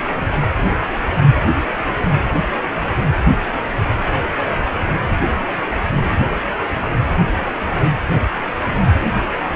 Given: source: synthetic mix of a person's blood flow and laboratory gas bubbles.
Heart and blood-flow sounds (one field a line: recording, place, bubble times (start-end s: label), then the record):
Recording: Doppler ultrasound of blood flow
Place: precordium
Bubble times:
0.16-0.26 s: bubbles
0.42-0.54 s: bubbles
From the record:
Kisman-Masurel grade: 221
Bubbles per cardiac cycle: several, 3 to 8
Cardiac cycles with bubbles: 10 to 50%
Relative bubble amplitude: barely perceptible (0.100 to 0.250)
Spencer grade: 2 (many but less than half of the cardiac periods contain bubble signals, singularly or in groups)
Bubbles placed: anywhere in the cardiac cycle